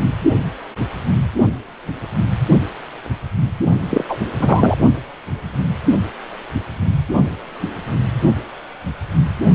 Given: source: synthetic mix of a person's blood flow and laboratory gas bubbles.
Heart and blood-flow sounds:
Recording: Doppler ultrasound of blood flow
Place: precordium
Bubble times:
3.89-4.04 s: bubbles
4.08-4.17 s: bubbles
4.40-4.77 s: bubbles
From the record:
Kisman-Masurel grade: 213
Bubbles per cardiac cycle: several, 3 to 8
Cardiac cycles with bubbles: 1 to 10%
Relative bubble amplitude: loud (0.450 to 0.775)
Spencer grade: 1 (occasional bubble signal discernible with the cardiac motion signal, with majority of cardiac periods free of bubbles)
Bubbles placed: only in the low amplitude regions of the cardiac cycle

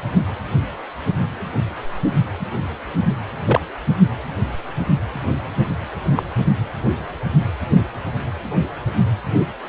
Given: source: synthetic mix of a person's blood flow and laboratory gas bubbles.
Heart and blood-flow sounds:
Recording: Doppler ultrasound of blood flow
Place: precordium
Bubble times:
3.41-3.60 s: bubbles
6.15-6.23 s: bubbles
From the record:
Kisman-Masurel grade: 112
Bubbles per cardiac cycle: 1 to 2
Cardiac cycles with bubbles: 1 to 10%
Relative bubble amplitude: moderate (0.250 to 0.450)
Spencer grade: 1 (occasional bubble signal discernible with the cardiac motion signal, with majority of cardiac periods free of bubbles)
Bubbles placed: only in the low amplitude regions of the cardiac cycle

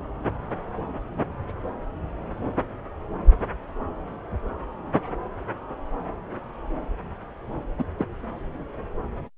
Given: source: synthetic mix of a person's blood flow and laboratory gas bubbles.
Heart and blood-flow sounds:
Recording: Doppler ultrasound of blood flow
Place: subclavian vein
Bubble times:
7.79-7.84 s: bubbles
7.98-8.05 s: bubbles
From the record:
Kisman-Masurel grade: 111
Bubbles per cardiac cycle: 1 to 2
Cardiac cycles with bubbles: 1 to 10%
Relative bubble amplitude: barely perceptible (0.100 to 0.250)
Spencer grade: 1 (occasional bubble signal discernible with the cardiac motion signal, with majority of cardiac periods free of bubbles)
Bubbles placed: anywhere in the cardiac cycle

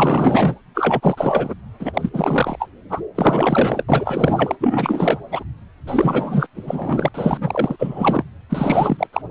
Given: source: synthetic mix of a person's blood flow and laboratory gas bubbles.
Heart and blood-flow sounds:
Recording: Doppler ultrasound of blood flow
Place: precordium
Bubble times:
0.00-0.55 s: bubbles
0.74-1.54 s: bubbles
1.79-2.10 s: bubbles
2.13-2.69 s: bubbles
2.89-3.01 s: bubbles
3.15-3.83 s: bubbles
3.89-4.55 s: bubbles
4.60-5.18 s: bubbles
5.31-5.43 s: bubbles
5.86-6.47 s: bubbles
6.54-7.08 s: bubbles
7.14-7.38 s: bubbles
7.40-8.25 s: bubbles
8.49-9.07 s: bubbles
9.12-9.22 s: bubbles
From the record:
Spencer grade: 4 (maximum detectable bubble signal sounding continuously throughout systole and diastole of every cardiac period, and overriding the amplitude of the normal cardiac signals)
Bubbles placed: anywhere in the cardiac cycle

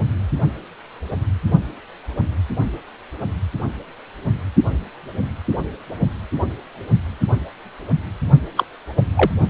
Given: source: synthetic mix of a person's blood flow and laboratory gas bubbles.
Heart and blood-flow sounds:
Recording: Doppler ultrasound of blood flow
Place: precordium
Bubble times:
8.57-8.64 s: bubbles
8.96-9.03 s: bubbles
9.17-9.30 s: bubbles
From the record:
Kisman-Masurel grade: 213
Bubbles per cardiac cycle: several, 3 to 8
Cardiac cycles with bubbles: 1 to 10%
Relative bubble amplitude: loud (0.450 to 0.775)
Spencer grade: 1 (occasional bubble signal discernible with the cardiac motion signal, with majority of cardiac periods free of bubbles)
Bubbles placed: only in the low amplitude regions of the cardiac cycle

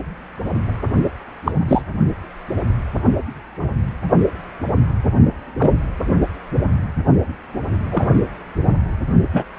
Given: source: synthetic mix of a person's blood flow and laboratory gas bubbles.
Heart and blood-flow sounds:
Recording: Doppler ultrasound of blood flow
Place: precordium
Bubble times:
1.46-1.52 s: bubbles
1.68-1.82 s: bubbles
5.59-5.72 s: bubbles
7.91-8.09 s: bubbles
9.33-9.44 s: bubbles
From the record:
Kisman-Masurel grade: 123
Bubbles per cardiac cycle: 1 to 2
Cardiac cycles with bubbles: 10 to 50%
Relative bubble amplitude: loud (0.450 to 0.775)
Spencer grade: 2 (many but less than half of the cardiac periods contain bubble signals, singularly or in groups)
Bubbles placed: only in the low amplitude regions of the cardiac cycle

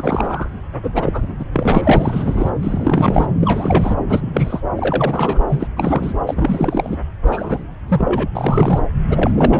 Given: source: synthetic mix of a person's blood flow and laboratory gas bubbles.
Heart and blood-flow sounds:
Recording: Doppler ultrasound of blood flow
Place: subclavian vein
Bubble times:
0.00-0.49 s: bubbles
0.83-1.33 s: bubbles
1.39-1.45 s: bubbles
1.53-2.51 s: bubbles
2.62-3.26 s: bubbles
3.40-3.94 s: bubbles
4.09-4.62 s: bubbles
4.77-5.43 s: bubbles
5.50-5.67 s: bubbles
5.76-6.13 s: bubbles
6.26-6.97 s: bubbles
7.26-7.64 s: bubbles
7.88-8.29 s: bubbles
8.35-8.79 s: bubbles
9.10-9.31 s: bubbles
9.35-9.60 s: bubbles
From the record:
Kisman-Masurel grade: 343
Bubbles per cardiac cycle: rolling drumbeat, 9 or more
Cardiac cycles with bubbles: 100%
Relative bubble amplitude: loud (0.450 to 0.775)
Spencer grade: 3 (all of the cardiac periods contain showers or single bubble signals, but not dominating or overriding the cardiac motion signals)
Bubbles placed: anywhere in the cardiac cycle

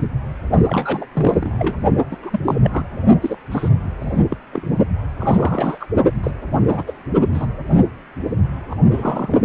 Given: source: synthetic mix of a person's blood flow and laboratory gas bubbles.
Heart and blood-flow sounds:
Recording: Doppler ultrasound of blood flow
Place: precordium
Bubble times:
0.67-1.06 s: bubbles
1.12-1.75 s: bubbles
2.10-2.17 s: bubbles
2.22-2.40 s: bubbles
2.44-2.56 s: bubbles
2.63-2.85 s: bubbles
3.21-3.36 s: bubbles
3.52-3.69 s: bubbles
3.99-4.19 s: bubbles
4.30-4.37 s: bubbles
4.53-4.67 s: bubbles
5.20-5.87 s: bubbles
6.23-6.31 s: bubbles
6.59-6.84 s: bubbles
6.87-6.93 s: bubbles
7.31-7.46 s: bubbles
7.67-7.77 s: bubbles
8.70-8.75 s: bubbles
8.90-9.41 s: bubbles
From the record:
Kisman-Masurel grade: 242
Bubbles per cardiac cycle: several, 3 to 8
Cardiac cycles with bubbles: 100%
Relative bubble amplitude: moderate (0.250 to 0.450)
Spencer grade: 3 (all of the cardiac periods contain showers or single bubble signals, but not dominating or overriding the cardiac motion signals)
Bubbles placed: only in the low amplitude regions of the cardiac cycle

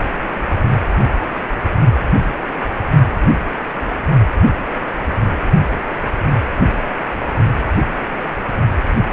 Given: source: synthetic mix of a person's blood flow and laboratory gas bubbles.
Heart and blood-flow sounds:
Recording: Doppler ultrasound of blood flow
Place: precordium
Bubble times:
no bubbles
From the record:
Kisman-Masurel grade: 000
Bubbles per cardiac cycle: 0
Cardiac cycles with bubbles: 0%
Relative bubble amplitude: no bubbles discernible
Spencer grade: 0 (complete lack of bubble signals)

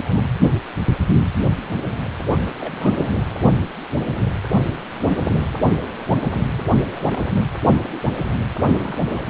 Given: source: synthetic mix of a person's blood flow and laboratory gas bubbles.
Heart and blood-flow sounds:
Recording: Doppler ultrasound of blood flow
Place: precordium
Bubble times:
0.00-0.30 s: bubbles
2.37-2.53 s: bubbles
2.58-2.96 s: bubbles
3.01-3.17 s: bubbles
3.20-3.24 s: bubbles
6.54-6.69 s: bubbles
6.96-7.00 s: bubbles
7.04-7.21 s: bubbles
8.58-9.26 s: bubbles
From the record:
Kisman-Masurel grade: 221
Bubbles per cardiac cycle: several, 3 to 8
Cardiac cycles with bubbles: 10 to 50%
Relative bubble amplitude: barely perceptible (0.100 to 0.250)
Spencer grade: 2 (many but less than half of the cardiac periods contain bubble signals, singularly or in groups)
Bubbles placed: anywhere in the cardiac cycle

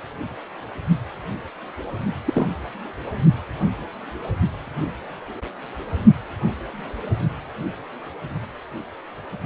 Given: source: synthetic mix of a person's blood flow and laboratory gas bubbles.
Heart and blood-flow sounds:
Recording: Doppler ultrasound of blood flow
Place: precordium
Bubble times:
2.25-2.48 s: bubbles
From the record:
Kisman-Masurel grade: 112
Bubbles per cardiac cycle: 1 to 2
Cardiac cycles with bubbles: 1 to 10%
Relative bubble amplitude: moderate (0.250 to 0.450)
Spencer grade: 1 (occasional bubble signal discernible with the cardiac motion signal, with majority of cardiac periods free of bubbles)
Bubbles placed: only in the low amplitude regions of the cardiac cycle

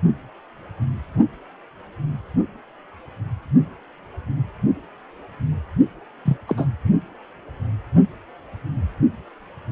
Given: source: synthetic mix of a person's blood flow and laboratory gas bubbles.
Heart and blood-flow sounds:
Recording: Doppler ultrasound of blood flow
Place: precordium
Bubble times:
6.25-6.37 s: bubbles
6.47-6.67 s: bubbles
From the record:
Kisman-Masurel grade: 223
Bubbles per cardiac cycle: several, 3 to 8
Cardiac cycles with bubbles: 10 to 50%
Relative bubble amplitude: loud (0.450 to 0.775)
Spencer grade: 2 (many but less than half of the cardiac periods contain bubble signals, singularly or in groups)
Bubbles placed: anywhere in the cardiac cycle

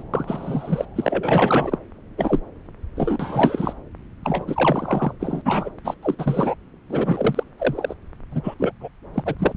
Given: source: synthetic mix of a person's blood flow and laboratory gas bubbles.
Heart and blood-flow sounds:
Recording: Doppler ultrasound of blood flow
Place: subclavian vein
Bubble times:
0.00-0.03 s: bubbles
0.14-0.85 s: bubbles
0.96-1.78 s: bubbles
2.17-2.40 s: bubbles
2.96-3.73 s: bubbles
4.24-5.13 s: bubbles
5.20-5.42 s: bubbles
5.45-5.71 s: bubbles
5.84-5.95 s: bubbles
6.03-6.15 s: bubbles
6.18-6.55 s: bubbles
6.89-7.43 s: bubbles
7.58-7.94 s: bubbles
8.31-8.41 s: bubbles
8.44-8.54 s: bubbles
8.59-8.71 s: bubbles
8.80-8.89 s: bubbles
9.14-9.35 s: bubbles
9.38-9.53 s: bubbles
From the record:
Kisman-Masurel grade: 343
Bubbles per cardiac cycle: rolling drumbeat, 9 or more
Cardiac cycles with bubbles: 100%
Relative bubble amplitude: loud (0.450 to 0.775)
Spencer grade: 3 (all of the cardiac periods contain showers or single bubble signals, but not dominating or overriding the cardiac motion signals)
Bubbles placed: anywhere in the cardiac cycle

